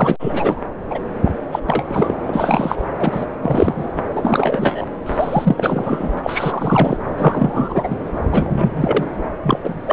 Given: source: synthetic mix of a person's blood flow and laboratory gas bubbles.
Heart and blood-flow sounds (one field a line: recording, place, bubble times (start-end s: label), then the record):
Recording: Doppler ultrasound of blood flow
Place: subclavian vein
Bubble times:
0.00-0.17 s: bubbles
0.19-0.62 s: bubbles
0.90-0.99 s: bubbles
1.24-1.31 s: bubbles
1.51-1.60 s: bubbles
1.67-1.84 s: bubbles
1.88-2.15 s: bubbles
2.26-2.86 s: bubbles
2.98-3.26 s: bubbles
3.42-3.90 s: bubbles
4.13-4.85 s: bubbles
5.06-6.14 s: bubbles
6.23-6.97 s: bubbles
7.18-7.96 s: bubbles
8.31-9.07 s: bubbles
9.43-9.59 s: bubbles
9.64-9.83 s: bubbles
9.86-9.93 s: bubbles
From the record:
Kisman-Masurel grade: 343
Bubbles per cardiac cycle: rolling drumbeat, 9 or more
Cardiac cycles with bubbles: 100%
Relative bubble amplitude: loud (0.450 to 0.775)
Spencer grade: 3 (all of the cardiac periods contain showers or single bubble signals, but not dominating or overriding the cardiac motion signals)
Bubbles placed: anywhere in the cardiac cycle